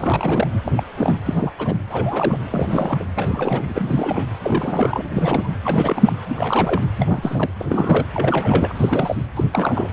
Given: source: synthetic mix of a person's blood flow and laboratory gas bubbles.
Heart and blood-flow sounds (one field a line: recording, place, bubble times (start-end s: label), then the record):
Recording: Doppler ultrasound of blood flow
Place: precordium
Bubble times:
0.00-0.48 s: bubbles
0.64-0.72 s: bubbles
0.76-0.83 s: bubbles
0.95-1.19 s: bubbles
1.25-1.52 s: bubbles
1.58-1.79 s: bubbles
1.90-2.37 s: bubbles
2.51-3.04 s: bubbles
3.16-4.29 s: bubbles
4.42-5.02 s: bubbles
5.11-5.50 s: bubbles
5.65-6.12 s: bubbles
6.29-6.82 s: bubbles
6.98-7.51 s: bubbles
7.60-8.06 s: bubbles
8.14-8.72 s: bubbles
8.75-9.27 s: bubbles
9.35-9.44 s: bubbles
9.52-9.90 s: bubbles
From the record:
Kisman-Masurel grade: 342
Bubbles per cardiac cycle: rolling drumbeat, 9 or more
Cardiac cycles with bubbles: 100%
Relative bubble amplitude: moderate (0.250 to 0.450)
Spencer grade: 3 (all of the cardiac periods contain showers or single bubble signals, but not dominating or overriding the cardiac motion signals)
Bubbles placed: anywhere in the cardiac cycle